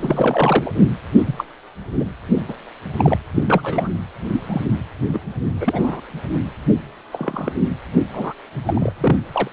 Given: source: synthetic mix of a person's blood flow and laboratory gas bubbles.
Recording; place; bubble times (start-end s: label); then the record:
Doppler ultrasound of blood flow; precordium
0.00-0.71 s: bubbles
1.16-1.23 s: bubbles
1.26-1.35 s: bubbles
1.38-1.44 s: bubbles
1.99-2.04 s: bubbles
2.47-2.54 s: bubbles
2.98-3.17 s: bubbles
3.31-3.89 s: bubbles
4.33-4.41 s: bubbles
4.49-4.61 s: bubbles
5.08-5.20 s: bubbles
5.60-6.00 s: bubbles
7.12-7.53 s: bubbles
8.13-8.33 s: bubbles
8.66-8.93 s: bubbles
9.00-9.18 s: bubbles
9.32-9.48 s: bubbles
From the record:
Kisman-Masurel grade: 242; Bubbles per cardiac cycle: several, 3 to 8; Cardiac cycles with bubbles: 100%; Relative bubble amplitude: moderate (0.250 to 0.450); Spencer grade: 3 (all of the cardiac periods contain showers or single bubble signals, but not dominating or overriding the cardiac motion signals); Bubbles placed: anywhere in the cardiac cycle